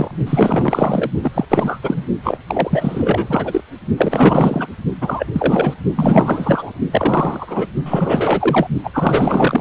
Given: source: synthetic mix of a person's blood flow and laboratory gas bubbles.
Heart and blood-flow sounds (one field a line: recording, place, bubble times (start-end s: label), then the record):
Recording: Doppler ultrasound of blood flow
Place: precordium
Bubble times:
0.00-0.12 s: bubbles
0.27-1.09 s: bubbles
1.22-1.31 s: bubbles
1.34-1.45 s: bubbles
1.49-1.80 s: bubbles
1.82-2.04 s: bubbles
2.23-2.38 s: bubbles
2.47-3.62 s: bubbles
3.97-4.67 s: bubbles
5.01-5.26 s: bubbles
5.33-5.74 s: bubbles
5.96-6.72 s: bubbles
6.92-7.67 s: bubbles
7.85-8.67 s: bubbles
8.84-8.91 s: bubbles
8.93-9.61 s: bubbles
From the record:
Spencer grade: 4 (maximum detectable bubble signal sounding continuously throughout systole and diastole of every cardiac period, and overriding the amplitude of the normal cardiac signals)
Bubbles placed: only in the low amplitude regions of the cardiac cycle